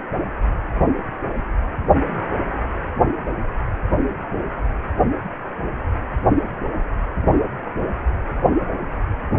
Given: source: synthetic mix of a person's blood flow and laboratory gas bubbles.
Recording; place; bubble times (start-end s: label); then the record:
Doppler ultrasound of blood flow; precordium
no bubbles
From the record:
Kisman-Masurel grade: 000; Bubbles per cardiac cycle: 0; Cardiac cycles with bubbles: 0%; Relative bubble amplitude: no bubbles discernible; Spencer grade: 0 (complete lack of bubble signals)